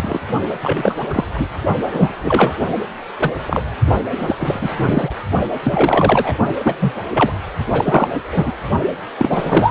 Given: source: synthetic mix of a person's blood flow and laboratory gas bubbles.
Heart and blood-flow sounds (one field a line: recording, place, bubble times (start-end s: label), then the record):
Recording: Doppler ultrasound of blood flow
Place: precordium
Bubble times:
0.00-0.21 s: bubbles
0.62-1.04 s: bubbles
1.10-1.24 s: bubbles
1.33-1.48 s: bubbles
1.81-2.12 s: bubbles
2.22-2.54 s: bubbles
3.20-3.33 s: bubbles
3.46-3.61 s: bubbles
4.06-4.11 s: bubbles
4.19-4.70 s: bubbles
4.76-5.10 s: bubbles
5.63-6.37 s: bubbles
6.63-6.74 s: bubbles
6.80-6.95 s: bubbles
7.13-7.32 s: bubbles
7.71-8.08 s: bubbles
8.32-8.51 s: bubbles
9.18-9.71 s: bubbles
From the record:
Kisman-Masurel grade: 243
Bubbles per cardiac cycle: several, 3 to 8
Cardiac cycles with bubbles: 100%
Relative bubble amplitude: loud (0.450 to 0.775)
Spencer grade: 3 (all of the cardiac periods contain showers or single bubble signals, but not dominating or overriding the cardiac motion signals)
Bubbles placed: only in the low amplitude regions of the cardiac cycle